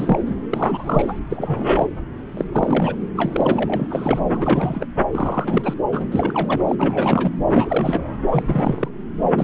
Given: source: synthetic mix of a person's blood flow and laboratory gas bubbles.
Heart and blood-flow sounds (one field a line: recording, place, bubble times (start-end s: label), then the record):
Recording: Doppler ultrasound of blood flow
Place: subclavian vein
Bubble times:
0.00-0.22 s: bubbles
0.26-0.35 s: bubbles
0.49-1.19 s: bubbles
1.30-1.87 s: bubbles
2.37-2.45 s: bubbles
2.52-2.95 s: bubbles
3.17-3.88 s: bubbles
3.90-4.22 s: bubbles
4.33-4.85 s: bubbles
5.11-5.74 s: bubbles
5.92-6.06 s: bubbles
6.11-6.62 s: bubbles
6.67-6.75 s: bubbles
6.78-7.29 s: bubbles
7.48-8.11 s: bubbles
8.31-8.88 s: bubbles
9.36-9.44 s: bubbles
From the record:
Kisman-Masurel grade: 342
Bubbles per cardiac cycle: rolling drumbeat, 9 or more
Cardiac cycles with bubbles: 100%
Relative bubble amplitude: moderate (0.250 to 0.450)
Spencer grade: 3 (all of the cardiac periods contain showers or single bubble signals, but not dominating or overriding the cardiac motion signals)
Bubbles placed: anywhere in the cardiac cycle